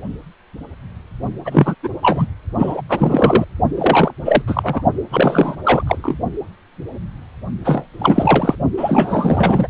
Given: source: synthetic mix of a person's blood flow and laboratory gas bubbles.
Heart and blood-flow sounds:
Doppler ultrasound of blood flow; precordium
1.45-1.74 s: bubbles
1.82-1.89 s: bubbles
2.02-2.28 s: bubbles
2.54-2.82 s: bubbles
2.89-3.45 s: bubbles
3.77-4.11 s: bubbles
4.25-4.42 s: bubbles
4.47-4.82 s: bubbles
5.11-5.55 s: bubbles
5.64-6.20 s: bubbles
7.63-8.56 s: bubbles
8.77-9.68 s: bubbles
From the record:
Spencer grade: 3 (all of the cardiac periods contain showers or single bubble signals, but not dominating or overriding the cardiac motion signals); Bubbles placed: only in the low amplitude regions of the cardiac cycle

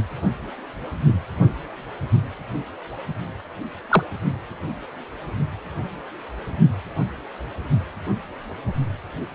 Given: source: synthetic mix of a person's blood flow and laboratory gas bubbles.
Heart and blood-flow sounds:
Doppler ultrasound of blood flow; precordium
3.90-4.03 s: bubbles
From the record:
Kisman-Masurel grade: 113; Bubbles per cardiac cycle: 1 to 2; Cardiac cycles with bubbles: 1 to 10%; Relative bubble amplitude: loud (0.450 to 0.775); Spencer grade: 1 (occasional bubble signal discernible with the cardiac motion signal, with majority of cardiac periods free of bubbles); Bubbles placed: only in the low amplitude regions of the cardiac cycle

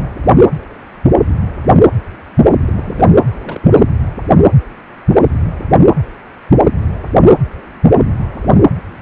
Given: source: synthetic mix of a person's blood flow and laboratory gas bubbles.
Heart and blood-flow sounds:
Doppler ultrasound of blood flow; precordium
2.65-2.73 s: bubbles
2.75-3.09 s: bubbles
3.29-3.68 s: bubbles
3.76-3.83 s: bubbles
From the record:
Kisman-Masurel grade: 221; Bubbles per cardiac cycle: several, 3 to 8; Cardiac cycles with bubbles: 10 to 50%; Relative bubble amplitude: barely perceptible (0.100 to 0.250); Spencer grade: 2 (many but less than half of the cardiac periods contain bubble signals, singularly or in groups); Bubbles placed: anywhere in the cardiac cycle

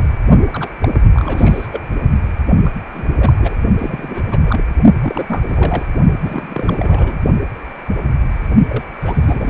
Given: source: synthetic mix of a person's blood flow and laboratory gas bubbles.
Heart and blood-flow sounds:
Doppler ultrasound of blood flow; precordium
0.00-0.03 s: bubbles
0.52-0.69 s: bubbles
0.81-0.88 s: bubbles
0.93-1.01 s: bubbles
1.13-1.67 s: bubbles
1.72-1.83 s: bubbles
2.64-2.71 s: bubbles
2.94-3.07 s: bubbles
3.20-3.60 s: bubbles
3.78-4.40 s: bubbles
4.45-4.65 s: bubbles
5.03-5.44 s: bubbles
5.50-5.86 s: bubbles
6.21-7.17 s: bubbles
8.68-8.85 s: bubbles
9.01-9.50 s: bubbles
From the record:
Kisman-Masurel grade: 332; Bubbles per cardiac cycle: rolling drumbeat, 9 or more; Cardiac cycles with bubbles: 50 to 99%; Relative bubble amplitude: moderate (0.250 to 0.450); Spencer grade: 3 (all of the cardiac periods contain showers or single bubble signals, but not dominating or overriding the cardiac motion signals); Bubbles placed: only in the low amplitude regions of the cardiac cycle

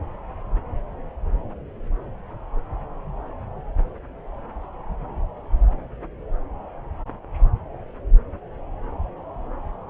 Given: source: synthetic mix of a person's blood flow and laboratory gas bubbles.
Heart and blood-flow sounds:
Doppler ultrasound of blood flow; subclavian vein
no bubbles
From the record:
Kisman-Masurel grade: 000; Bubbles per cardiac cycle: 0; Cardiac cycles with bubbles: 0%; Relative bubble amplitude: no bubbles discernible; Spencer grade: 0 (complete lack of bubble signals)

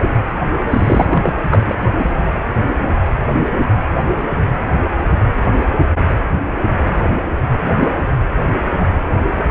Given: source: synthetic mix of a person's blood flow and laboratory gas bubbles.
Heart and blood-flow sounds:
Doppler ultrasound of blood flow; precordium
0.70-1.07 s: bubbles
1.10-1.35 s: bubbles
1.48-1.86 s: bubbles
1.99-2.08 s: bubbles
From the record:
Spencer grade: 2 (many but less than half of the cardiac periods contain bubble signals, singularly or in groups); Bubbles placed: anywhere in the cardiac cycle

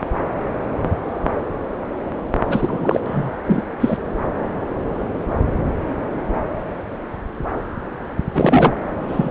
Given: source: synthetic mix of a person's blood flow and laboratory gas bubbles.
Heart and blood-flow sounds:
Doppler ultrasound of blood flow; subclavian vein
2.47-3.00 s: bubbles
3.06-3.31 s: bubbles
3.46-3.63 s: bubbles
3.80-3.97 s: bubbles
8.33-8.74 s: bubbles
9.07-9.31 s: bubbles
From the record:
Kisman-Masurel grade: 223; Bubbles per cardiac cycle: several, 3 to 8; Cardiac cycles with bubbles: 10 to 50%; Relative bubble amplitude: loud (0.450 to 0.775); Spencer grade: 2 (many but less than half of the cardiac periods contain bubble signals, singularly or in groups); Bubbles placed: anywhere in the cardiac cycle

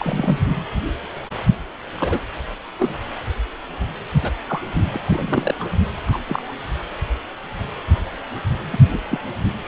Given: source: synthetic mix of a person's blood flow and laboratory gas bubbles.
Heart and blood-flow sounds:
Doppler ultrasound of blood flow; precordium
0.00-0.39 s: bubbles
1.96-2.20 s: bubbles
2.78-2.97 s: bubbles
4.22-4.31 s: bubbles
4.47-4.62 s: bubbles
4.74-5.00 s: bubbles
5.02-5.54 s: bubbles
5.59-5.68 s: bubbles
6.06-6.18 s: bubbles
6.26-6.53 s: bubbles
8.73-8.79 s: bubbles
8.92-8.98 s: bubbles
9.08-9.20 s: bubbles
From the record:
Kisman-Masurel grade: 232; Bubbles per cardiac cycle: several, 3 to 8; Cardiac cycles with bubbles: 50 to 99%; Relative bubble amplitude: moderate (0.250 to 0.450); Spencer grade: 3 (all of the cardiac periods contain showers or single bubble signals, but not dominating or overriding the cardiac motion signals); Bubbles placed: anywhere in the cardiac cycle

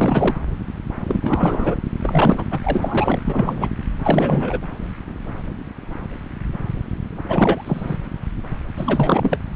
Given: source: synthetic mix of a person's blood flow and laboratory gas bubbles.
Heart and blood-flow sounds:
Doppler ultrasound of blood flow; subclavian vein
0.00-0.34 s: bubbles
1.07-1.75 s: bubbles
1.99-2.44 s: bubbles
2.51-2.60 s: bubbles
2.64-3.20 s: bubbles
3.25-3.69 s: bubbles
4.03-4.60 s: bubbles
7.28-7.97 s: bubbles
8.77-9.38 s: bubbles
From the record:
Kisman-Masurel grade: 333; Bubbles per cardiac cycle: rolling drumbeat, 9 or more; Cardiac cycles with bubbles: 50 to 99%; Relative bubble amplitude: loud (0.450 to 0.775); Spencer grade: 3 (all of the cardiac periods contain showers or single bubble signals, but not dominating or overriding the cardiac motion signals); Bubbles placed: anywhere in the cardiac cycle

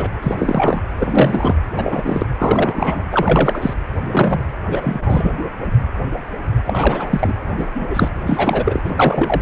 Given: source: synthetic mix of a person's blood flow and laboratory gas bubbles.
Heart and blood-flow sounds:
Doppler ultrasound of blood flow; precordium
0.00-0.10 s: bubbles
0.22-0.35 s: bubbles
0.38-0.82 s: bubbles
0.99-1.55 s: bubbles
1.76-2.25 s: bubbles
2.38-3.03 s: bubbles
3.11-3.73 s: bubbles
4.11-4.41 s: bubbles
4.67-5.32 s: bubbles
6.65-7.35 s: bubbles
7.57-7.67 s: bubbles
7.75-7.86 s: bubbles
7.90-8.10 s: bubbles
8.27-8.81 s: bubbles
8.84-9.42 s: bubbles
From the record:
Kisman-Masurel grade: 233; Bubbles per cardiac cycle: several, 3 to 8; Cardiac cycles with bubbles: 50 to 99%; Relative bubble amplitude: loud (0.450 to 0.775); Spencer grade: 3 (all of the cardiac periods contain showers or single bubble signals, but not dominating or overriding the cardiac motion signals); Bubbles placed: anywhere in the cardiac cycle

